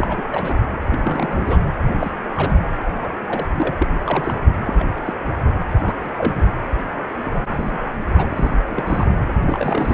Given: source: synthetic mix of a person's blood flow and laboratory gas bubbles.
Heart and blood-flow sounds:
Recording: Doppler ultrasound of blood flow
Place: precordium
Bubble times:
0.00-0.22 s: bubbles
0.31-0.55 s: bubbles
0.89-1.64 s: bubbles
1.88-2.14 s: bubbles
2.34-2.60 s: bubbles
2.86-3.15 s: bubbles
3.27-3.46 s: bubbles
3.50-3.75 s: bubbles
3.78-3.88 s: bubbles
3.98-4.40 s: bubbles
4.66-4.86 s: bubbles
5.06-5.14 s: bubbles
5.81-5.96 s: bubbles
6.03-6.11 s: bubbles
6.18-6.34 s: bubbles
6.38-6.43 s: bubbles
7.25-7.83 s: bubbles
8.13-8.58 s: bubbles
8.69-9.14 s: bubbles
9.47-9.94 s: bubbles
From the record:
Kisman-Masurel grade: 242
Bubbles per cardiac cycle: several, 3 to 8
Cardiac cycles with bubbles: 100%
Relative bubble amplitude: moderate (0.250 to 0.450)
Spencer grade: 3 (all of the cardiac periods contain showers or single bubble signals, but not dominating or overriding the cardiac motion signals)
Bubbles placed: anywhere in the cardiac cycle

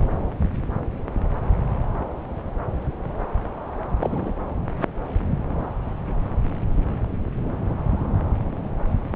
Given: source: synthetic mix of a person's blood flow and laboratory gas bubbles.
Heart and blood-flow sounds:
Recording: Doppler ultrasound of blood flow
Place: subclavian vein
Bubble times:
3.99-4.33 s: bubbles
From the record:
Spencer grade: 1 (occasional bubble signal discernible with the cardiac motion signal, with majority of cardiac periods free of bubbles)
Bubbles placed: anywhere in the cardiac cycle

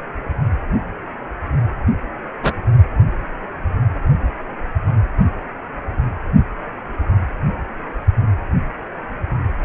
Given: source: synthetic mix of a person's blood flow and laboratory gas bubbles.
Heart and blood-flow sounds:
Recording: Doppler ultrasound of blood flow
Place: precordium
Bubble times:
2.43-2.52 s: bubbles
From the record:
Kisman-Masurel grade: 123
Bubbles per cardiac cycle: 1 to 2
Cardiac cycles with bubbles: 10 to 50%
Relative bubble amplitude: loud (0.450 to 0.775)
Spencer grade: 2 (many but less than half of the cardiac periods contain bubble signals, singularly or in groups)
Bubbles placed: only in the low amplitude regions of the cardiac cycle

